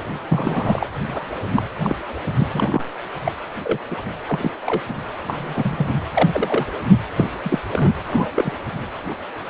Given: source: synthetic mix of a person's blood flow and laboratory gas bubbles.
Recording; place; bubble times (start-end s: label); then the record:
Doppler ultrasound of blood flow; precordium
0.27-0.89 s: bubbles
1.03-1.25 s: bubbles
1.54-1.62 s: bubbles
1.82-1.96 s: bubbles
2.38-2.48 s: bubbles
2.54-2.87 s: bubbles
3.24-3.32 s: bubbles
3.64-3.79 s: bubbles
3.91-4.01 s: bubbles
4.06-4.12 s: bubbles
4.28-4.51 s: bubbles
4.67-4.81 s: bubbles
4.88-4.95 s: bubbles
5.28-5.92 s: bubbles
6.15-6.67 s: bubbles
7.16-7.28 s: bubbles
7.44-7.60 s: bubbles
7.73-7.92 s: bubbles
7.95-8.01 s: bubbles
8.04-8.30 s: bubbles
8.35-8.51 s: bubbles
From the record:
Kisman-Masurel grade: 242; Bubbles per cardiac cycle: several, 3 to 8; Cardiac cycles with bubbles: 100%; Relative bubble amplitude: moderate (0.250 to 0.450); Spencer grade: 3 (all of the cardiac periods contain showers or single bubble signals, but not dominating or overriding the cardiac motion signals); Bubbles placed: anywhere in the cardiac cycle